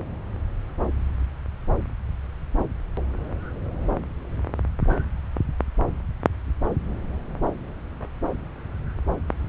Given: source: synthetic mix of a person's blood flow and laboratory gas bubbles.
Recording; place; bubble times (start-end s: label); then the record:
Doppler ultrasound of blood flow; subclavian vein
no bubbles
From the record:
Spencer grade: 0 (complete lack of bubble signals)